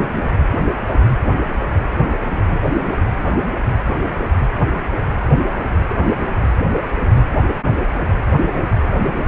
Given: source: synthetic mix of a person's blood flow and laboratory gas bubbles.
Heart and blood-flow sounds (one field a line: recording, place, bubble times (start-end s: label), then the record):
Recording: Doppler ultrasound of blood flow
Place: precordium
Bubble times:
5.89-5.96 s: bubbles
From the record:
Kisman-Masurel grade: 111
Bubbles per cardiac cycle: 1 to 2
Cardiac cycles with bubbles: 1 to 10%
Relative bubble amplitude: barely perceptible (0.100 to 0.250)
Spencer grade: 1 (occasional bubble signal discernible with the cardiac motion signal, with majority of cardiac periods free of bubbles)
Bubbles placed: anywhere in the cardiac cycle